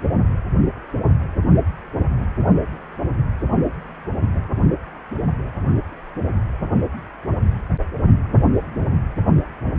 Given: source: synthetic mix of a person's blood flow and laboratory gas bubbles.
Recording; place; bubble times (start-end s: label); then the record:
Doppler ultrasound of blood flow; precordium
2.73-2.77 s: bubbles
From the record:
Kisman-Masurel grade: 111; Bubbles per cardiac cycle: 1 to 2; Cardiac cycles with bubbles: 1 to 10%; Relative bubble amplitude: barely perceptible (0.100 to 0.250); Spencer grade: 1 (occasional bubble signal discernible with the cardiac motion signal, with majority of cardiac periods free of bubbles); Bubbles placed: anywhere in the cardiac cycle